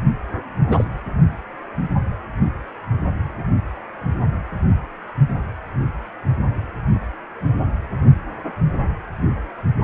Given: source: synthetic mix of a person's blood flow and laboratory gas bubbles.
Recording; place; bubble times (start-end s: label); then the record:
Doppler ultrasound of blood flow; precordium
0.68-0.84 s: bubbles
From the record:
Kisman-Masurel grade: 212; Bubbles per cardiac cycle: several, 3 to 8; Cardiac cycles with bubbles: 1 to 10%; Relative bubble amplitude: moderate (0.250 to 0.450); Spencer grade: 1 (occasional bubble signal discernible with the cardiac motion signal, with majority of cardiac periods free of bubbles); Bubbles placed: only in the low amplitude regions of the cardiac cycle